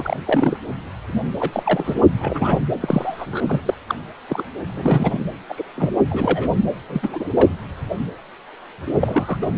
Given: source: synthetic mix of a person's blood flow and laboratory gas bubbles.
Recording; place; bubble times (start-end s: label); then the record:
Doppler ultrasound of blood flow; precordium
0.00-0.20 s: bubbles
0.26-0.57 s: bubbles
1.39-1.95 s: bubbles
2.19-2.59 s: bubbles
2.80-3.26 s: bubbles
3.31-3.42 s: bubbles
3.47-3.60 s: bubbles
3.66-3.74 s: bubbles
3.88-3.95 s: bubbles
4.29-4.43 s: bubbles
4.67-5.21 s: bubbles
5.49-5.64 s: bubbles
5.75-5.94 s: bubbles
6.09-6.50 s: bubbles
6.90-7.28 s: bubbles
7.34-7.50 s: bubbles
9.00-9.38 s: bubbles
9.42-9.51 s: bubbles
From the record:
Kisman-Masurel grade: 232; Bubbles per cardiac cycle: several, 3 to 8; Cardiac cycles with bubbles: 50 to 99%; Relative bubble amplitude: moderate (0.250 to 0.450); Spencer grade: 3 (all of the cardiac periods contain showers or single bubble signals, but not dominating or overriding the cardiac motion signals); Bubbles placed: anywhere in the cardiac cycle